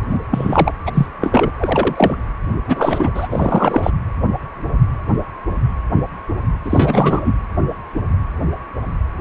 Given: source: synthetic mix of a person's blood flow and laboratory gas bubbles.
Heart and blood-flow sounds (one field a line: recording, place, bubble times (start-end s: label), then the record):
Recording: Doppler ultrasound of blood flow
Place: precordium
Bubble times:
0.11-0.19 s: bubbles
0.31-0.72 s: bubbles
0.86-1.06 s: bubbles
1.21-1.52 s: bubbles
1.58-2.16 s: bubbles
2.66-3.11 s: bubbles
3.14-3.90 s: bubbles
6.65-7.38 s: bubbles
From the record:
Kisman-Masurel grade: 233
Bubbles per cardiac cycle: several, 3 to 8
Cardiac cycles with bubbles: 50 to 99%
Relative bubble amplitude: loud (0.450 to 0.775)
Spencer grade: 3 (all of the cardiac periods contain showers or single bubble signals, but not dominating or overriding the cardiac motion signals)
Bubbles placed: anywhere in the cardiac cycle